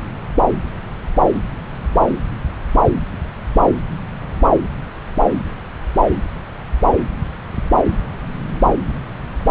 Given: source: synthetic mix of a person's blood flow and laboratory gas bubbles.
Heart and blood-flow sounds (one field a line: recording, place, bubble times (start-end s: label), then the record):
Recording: Doppler ultrasound of blood flow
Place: subclavian vein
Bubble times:
no bubbles
From the record:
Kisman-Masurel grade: 000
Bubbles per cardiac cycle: 0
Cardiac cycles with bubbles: 0%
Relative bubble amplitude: no bubbles discernible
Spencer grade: 0 (complete lack of bubble signals)